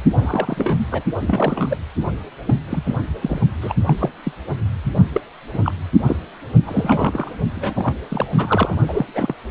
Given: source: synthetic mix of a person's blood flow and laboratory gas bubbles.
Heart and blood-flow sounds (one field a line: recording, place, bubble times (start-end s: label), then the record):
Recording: Doppler ultrasound of blood flow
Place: precordium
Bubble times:
0.15-0.86 s: bubbles
0.91-1.04 s: bubbles
1.27-1.77 s: bubbles
2.47-2.54 s: bubbles
2.69-2.83 s: bubbles
2.85-2.95 s: bubbles
3.21-3.41 s: bubbles
3.60-3.74 s: bubbles
3.85-3.93 s: bubbles
4.00-4.09 s: bubbles
4.25-4.32 s: bubbles
5.12-5.21 s: bubbles
5.53-5.59 s: bubbles
5.62-5.72 s: bubbles
6.05-6.17 s: bubbles
6.66-7.30 s: bubbles
7.55-7.95 s: bubbles
8.10-8.75 s: bubbles
8.88-9.05 s: bubbles
9.13-9.34 s: bubbles
From the record:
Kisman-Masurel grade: 242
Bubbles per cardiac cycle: several, 3 to 8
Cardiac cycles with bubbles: 100%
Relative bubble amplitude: moderate (0.250 to 0.450)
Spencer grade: 3 (all of the cardiac periods contain showers or single bubble signals, but not dominating or overriding the cardiac motion signals)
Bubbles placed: only in the low amplitude regions of the cardiac cycle